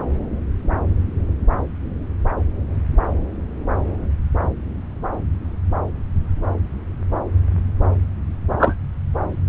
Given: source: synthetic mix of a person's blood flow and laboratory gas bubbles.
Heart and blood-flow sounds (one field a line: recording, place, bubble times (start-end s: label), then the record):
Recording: Doppler ultrasound of blood flow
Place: subclavian vein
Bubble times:
8.59-8.75 s: bubbles
From the record:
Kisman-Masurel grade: 123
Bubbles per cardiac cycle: 1 to 2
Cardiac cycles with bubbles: 10 to 50%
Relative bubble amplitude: loud (0.450 to 0.775)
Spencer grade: 2 (many but less than half of the cardiac periods contain bubble signals, singularly or in groups)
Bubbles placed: anywhere in the cardiac cycle